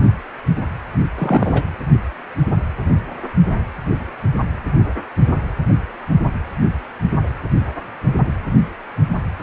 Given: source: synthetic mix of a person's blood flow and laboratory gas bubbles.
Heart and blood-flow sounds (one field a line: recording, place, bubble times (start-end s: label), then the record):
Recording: Doppler ultrasound of blood flow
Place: precordium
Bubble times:
1.18-1.65 s: bubbles
From the record:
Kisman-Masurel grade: 212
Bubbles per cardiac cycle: several, 3 to 8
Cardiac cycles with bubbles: 1 to 10%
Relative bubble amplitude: moderate (0.250 to 0.450)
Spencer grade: 1 (occasional bubble signal discernible with the cardiac motion signal, with majority of cardiac periods free of bubbles)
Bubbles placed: anywhere in the cardiac cycle